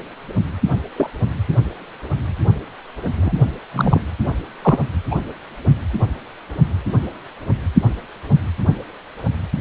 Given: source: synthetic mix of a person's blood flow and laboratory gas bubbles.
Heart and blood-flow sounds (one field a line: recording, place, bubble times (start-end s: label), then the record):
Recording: Doppler ultrasound of blood flow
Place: precordium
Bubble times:
0.96-1.10 s: bubbles
3.15-3.32 s: bubbles
3.73-3.99 s: bubbles
4.62-4.79 s: bubbles
5.11-5.17 s: bubbles
From the record:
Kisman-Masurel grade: 122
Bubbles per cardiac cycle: 1 to 2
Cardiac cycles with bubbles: 10 to 50%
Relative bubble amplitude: moderate (0.250 to 0.450)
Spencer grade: 2 (many but less than half of the cardiac periods contain bubble signals, singularly or in groups)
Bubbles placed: only in the low amplitude regions of the cardiac cycle